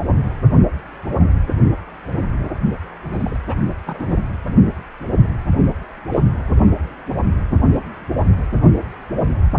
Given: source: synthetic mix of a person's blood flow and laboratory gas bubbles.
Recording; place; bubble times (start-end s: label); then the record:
Doppler ultrasound of blood flow; precordium
3.12-3.39 s: bubbles
3.48-3.55 s: bubbles
3.86-4.17 s: bubbles
6.12-6.21 s: bubbles
From the record:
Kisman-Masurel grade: 122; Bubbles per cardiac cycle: 1 to 2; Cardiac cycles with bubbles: 10 to 50%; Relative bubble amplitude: moderate (0.250 to 0.450); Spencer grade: 2 (many but less than half of the cardiac periods contain bubble signals, singularly or in groups); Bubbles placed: anywhere in the cardiac cycle